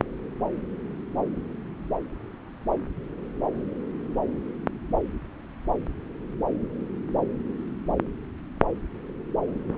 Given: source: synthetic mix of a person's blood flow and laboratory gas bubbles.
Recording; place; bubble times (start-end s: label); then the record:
Doppler ultrasound of blood flow; subclavian vein
no bubbles
From the record:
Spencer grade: 0 (complete lack of bubble signals)